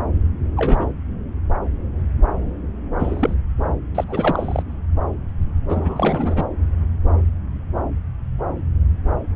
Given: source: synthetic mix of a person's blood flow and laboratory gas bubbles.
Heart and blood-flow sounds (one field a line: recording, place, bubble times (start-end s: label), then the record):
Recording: Doppler ultrasound of blood flow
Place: subclavian vein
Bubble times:
0.56-0.92 s: bubbles
2.99-3.34 s: bubbles
3.94-4.04 s: bubbles
4.08-4.62 s: bubbles
5.68-6.46 s: bubbles
From the record:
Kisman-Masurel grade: 222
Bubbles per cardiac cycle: several, 3 to 8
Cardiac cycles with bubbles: 10 to 50%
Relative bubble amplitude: moderate (0.250 to 0.450)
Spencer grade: 2 (many but less than half of the cardiac periods contain bubble signals, singularly or in groups)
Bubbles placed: anywhere in the cardiac cycle